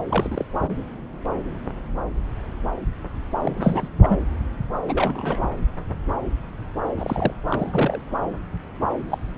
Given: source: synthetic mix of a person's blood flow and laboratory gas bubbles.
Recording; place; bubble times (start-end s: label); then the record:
Doppler ultrasound of blood flow; subclavian vein
0.09-0.45 s: bubbles
0.62-0.76 s: bubbles
3.42-3.89 s: bubbles
4.02-4.17 s: bubbles
4.88-5.47 s: bubbles
6.97-7.33 s: bubbles
7.48-8.01 s: bubbles
9.09-9.18 s: bubbles
9.35-9.38 s: bubbles
From the record:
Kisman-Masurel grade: 221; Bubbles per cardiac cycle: several, 3 to 8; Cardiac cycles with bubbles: 10 to 50%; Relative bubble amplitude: barely perceptible (0.100 to 0.250); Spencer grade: 2 (many but less than half of the cardiac periods contain bubble signals, singularly or in groups); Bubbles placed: anywhere in the cardiac cycle